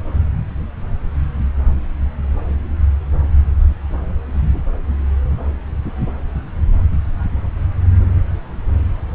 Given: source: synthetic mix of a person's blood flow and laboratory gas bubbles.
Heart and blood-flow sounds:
Doppler ultrasound of blood flow; subclavian vein
no bubbles
From the record:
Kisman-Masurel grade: 000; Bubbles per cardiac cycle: 0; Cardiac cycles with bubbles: 0%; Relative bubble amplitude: no bubbles discernible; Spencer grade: 0 (complete lack of bubble signals)

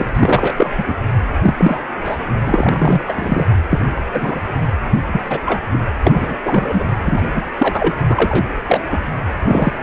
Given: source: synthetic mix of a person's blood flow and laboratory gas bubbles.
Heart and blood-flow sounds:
Doppler ultrasound of blood flow; precordium
0.00-0.05 s: bubbles
0.14-0.54 s: bubbles
0.57-0.70 s: bubbles
0.78-0.84 s: bubbles
0.86-0.95 s: bubbles
1.42-1.54 s: bubbles
1.57-1.84 s: bubbles
2.04-2.17 s: bubbles
2.47-3.01 s: bubbles
3.06-3.46 s: bubbles
3.70-3.85 s: bubbles
4.13-4.40 s: bubbles
5.06-5.21 s: bubbles
5.29-5.38 s: bubbles
5.46-5.62 s: bubbles
5.72-5.79 s: bubbles
6.04-6.37 s: bubbles
6.45-6.84 s: bubbles
7.02-7.22 s: bubbles
7.34-7.41 s: bubbles
7.58-7.94 s: bubbles
8.09-8.45 s: bubbles
8.67-8.81 s: bubbles
8.92-9.00 s: bubbles
9.44-9.73 s: bubbles
From the record:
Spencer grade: 3 (all of the cardiac periods contain showers or single bubble signals, but not dominating or overriding the cardiac motion signals); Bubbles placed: anywhere in the cardiac cycle

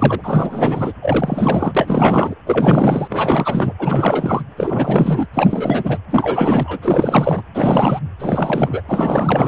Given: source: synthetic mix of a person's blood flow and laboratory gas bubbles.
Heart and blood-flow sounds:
Doppler ultrasound of blood flow; precordium
0.00-0.92 s: bubbles
1.01-2.35 s: bubbles
2.46-3.73 s: bubbles
3.79-4.43 s: bubbles
4.57-5.27 s: bubbles
5.33-5.99 s: bubbles
6.11-6.79 s: bubbles
6.82-7.42 s: bubbles
7.54-8.00 s: bubbles
8.19-8.82 s: bubbles
8.88-9.48 s: bubbles
From the record:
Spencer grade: 4 (maximum detectable bubble signal sounding continuously throughout systole and diastole of every cardiac period, and overriding the amplitude of the normal cardiac signals); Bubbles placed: anywhere in the cardiac cycle

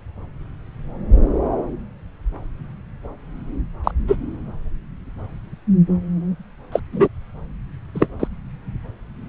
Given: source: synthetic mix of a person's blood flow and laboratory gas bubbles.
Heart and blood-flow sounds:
Doppler ultrasound of blood flow; subclavian vein
3.84-3.92 s: bubbles
4.07-4.17 s: bubbles
6.72-6.79 s: bubbles
6.92-7.08 s: bubbles
7.95-8.08 s: bubbles
8.20-8.28 s: bubbles
From the record:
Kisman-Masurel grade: 123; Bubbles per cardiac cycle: 1 to 2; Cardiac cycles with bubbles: 10 to 50%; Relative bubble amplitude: loud (0.450 to 0.775); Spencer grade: 2 (many but less than half of the cardiac periods contain bubble signals, singularly or in groups); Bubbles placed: anywhere in the cardiac cycle

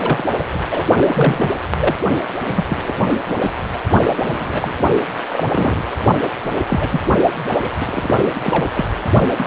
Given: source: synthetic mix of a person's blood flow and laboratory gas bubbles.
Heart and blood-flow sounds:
Doppler ultrasound of blood flow; precordium
0.00-0.22 s: bubbles
0.38-0.45 s: bubbles
0.53-0.61 s: bubbles
0.71-0.87 s: bubbles
1.00-1.52 s: bubbles
1.79-1.95 s: bubbles
2.44-2.65 s: bubbles
2.69-2.93 s: bubbles
3.02-3.09 s: bubbles
3.28-3.38 s: bubbles
3.40-3.53 s: bubbles
4.26-4.72 s: bubbles
5.32-5.82 s: bubbles
6.65-7.04 s: bubbles
7.60-7.69 s: bubbles
7.79-8.21 s: bubbles
8.34-8.41 s: bubbles
8.44-8.86 s: bubbles
9.37-9.46 s: bubbles
From the record:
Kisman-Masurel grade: 242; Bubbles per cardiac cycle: several, 3 to 8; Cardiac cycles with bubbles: 100%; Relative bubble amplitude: moderate (0.250 to 0.450); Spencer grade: 3 (all of the cardiac periods contain showers or single bubble signals, but not dominating or overriding the cardiac motion signals); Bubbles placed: only in the low amplitude regions of the cardiac cycle

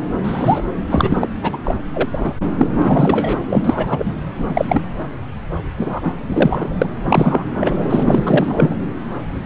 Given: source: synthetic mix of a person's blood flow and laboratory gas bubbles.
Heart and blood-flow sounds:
Doppler ultrasound of blood flow; subclavian vein
0.24-0.62 s: bubbles
0.90-1.28 s: bubbles
1.42-1.58 s: bubbles
1.65-1.75 s: bubbles
1.93-2.08 s: bubbles
2.12-2.33 s: bubbles
2.58-2.69 s: bubbles
2.82-3.38 s: bubbles
3.50-4.14 s: bubbles
4.38-4.65 s: bubbles
4.68-4.83 s: bubbles
5.77-6.00 s: bubbles
6.03-6.12 s: bubbles
6.33-6.71 s: bubbles
6.81-6.86 s: bubbles
7.03-7.44 s: bubbles
7.55-8.23 s: bubbles
8.27-8.76 s: bubbles
From the record:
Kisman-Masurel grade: 233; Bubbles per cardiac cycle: several, 3 to 8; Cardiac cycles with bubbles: 50 to 99%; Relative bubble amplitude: loud (0.450 to 0.775); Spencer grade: 3 (all of the cardiac periods contain showers or single bubble signals, but not dominating or overriding the cardiac motion signals); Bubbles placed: anywhere in the cardiac cycle

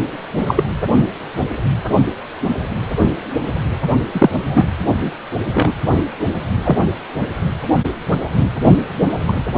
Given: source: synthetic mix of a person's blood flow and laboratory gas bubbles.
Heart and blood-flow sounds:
Doppler ultrasound of blood flow; precordium
0.47-0.64 s: bubbles
4.12-4.30 s: bubbles
4.45-4.65 s: bubbles
5.01-5.12 s: bubbles
5.54-5.73 s: bubbles
6.63-6.77 s: bubbles
9.27-9.33 s: bubbles
From the record:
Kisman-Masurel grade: 123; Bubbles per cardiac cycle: 1 to 2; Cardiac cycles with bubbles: 10 to 50%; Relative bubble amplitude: loud (0.450 to 0.775); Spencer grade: 2 (many but less than half of the cardiac periods contain bubble signals, singularly or in groups); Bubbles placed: only in the low amplitude regions of the cardiac cycle

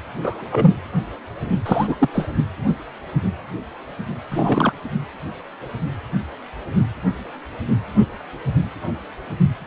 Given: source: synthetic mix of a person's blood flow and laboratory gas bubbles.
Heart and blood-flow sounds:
Doppler ultrasound of blood flow; precordium
0.15-0.45 s: bubbles
0.52-0.77 s: bubbles
1.66-1.96 s: bubbles
2.00-2.09 s: bubbles
2.12-2.27 s: bubbles
4.31-4.73 s: bubbles
From the record:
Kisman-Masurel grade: 223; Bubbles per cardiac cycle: several, 3 to 8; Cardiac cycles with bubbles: 10 to 50%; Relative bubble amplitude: loud (0.450 to 0.775); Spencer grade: 2 (many but less than half of the cardiac periods contain bubble signals, singularly or in groups); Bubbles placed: anywhere in the cardiac cycle

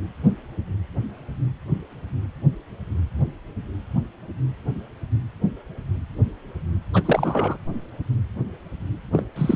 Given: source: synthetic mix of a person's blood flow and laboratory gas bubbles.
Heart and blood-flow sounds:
Doppler ultrasound of blood flow; precordium
6.93-7.58 s: bubbles
9.12-9.25 s: bubbles
9.36-9.56 s: bubbles
From the record:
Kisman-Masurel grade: 212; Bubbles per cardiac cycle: several, 3 to 8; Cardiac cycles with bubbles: 1 to 10%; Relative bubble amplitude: moderate (0.250 to 0.450); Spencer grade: 1 (occasional bubble signal discernible with the cardiac motion signal, with majority of cardiac periods free of bubbles); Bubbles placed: anywhere in the cardiac cycle

